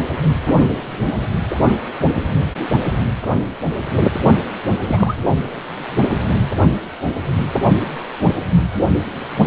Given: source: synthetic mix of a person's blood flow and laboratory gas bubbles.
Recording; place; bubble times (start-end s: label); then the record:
Doppler ultrasound of blood flow; precordium
4.87-5.15 s: bubbles
From the record:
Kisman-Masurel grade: 222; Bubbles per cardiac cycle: several, 3 to 8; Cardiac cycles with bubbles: 10 to 50%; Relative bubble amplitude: moderate (0.250 to 0.450); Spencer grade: 2 (many but less than half of the cardiac periods contain bubble signals, singularly or in groups); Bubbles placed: only in the low amplitude regions of the cardiac cycle